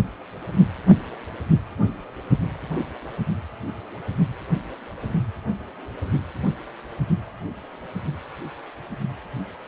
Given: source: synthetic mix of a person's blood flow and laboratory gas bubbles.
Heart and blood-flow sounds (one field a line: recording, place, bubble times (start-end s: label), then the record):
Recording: Doppler ultrasound of blood flow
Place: precordium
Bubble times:
no bubbles
From the record:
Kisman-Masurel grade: 000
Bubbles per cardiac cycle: 0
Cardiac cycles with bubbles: 0%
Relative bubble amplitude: no bubbles discernible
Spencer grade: 0 (complete lack of bubble signals)